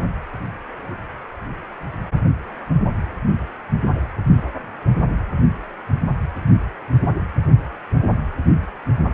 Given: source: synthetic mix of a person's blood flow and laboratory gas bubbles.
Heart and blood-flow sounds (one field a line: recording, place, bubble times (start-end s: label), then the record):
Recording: Doppler ultrasound of blood flow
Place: precordium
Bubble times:
no bubbles
From the record:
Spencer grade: 0 (complete lack of bubble signals)